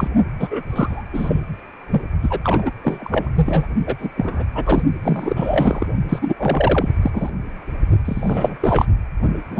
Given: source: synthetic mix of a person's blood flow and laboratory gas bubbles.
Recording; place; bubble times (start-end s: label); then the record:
Doppler ultrasound of blood flow; precordium
0.00-0.09 s: bubbles
0.39-0.48 s: bubbles
0.51-0.62 s: bubbles
0.69-1.04 s: bubbles
1.13-1.41 s: bubbles
1.91-2.02 s: bubbles
2.22-2.40 s: bubbles
2.44-2.71 s: bubbles
2.82-3.29 s: bubbles
3.35-3.67 s: bubbles
3.86-3.95 s: bubbles
4.00-4.09 s: bubbles
4.17-4.43 s: bubbles
4.55-4.83 s: bubbles
5.03-5.87 s: bubbles
6.09-6.19 s: bubbles
6.21-6.34 s: bubbles
6.38-6.89 s: bubbles
7.02-7.32 s: bubbles
8.05-8.56 s: bubbles
8.62-8.86 s: bubbles
9.51-9.59 s: bubbles
From the record:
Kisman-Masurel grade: 343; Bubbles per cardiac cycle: rolling drumbeat, 9 or more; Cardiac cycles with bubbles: 100%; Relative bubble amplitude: loud (0.450 to 0.775); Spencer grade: 3 (all of the cardiac periods contain showers or single bubble signals, but not dominating or overriding the cardiac motion signals); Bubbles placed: only in the low amplitude regions of the cardiac cycle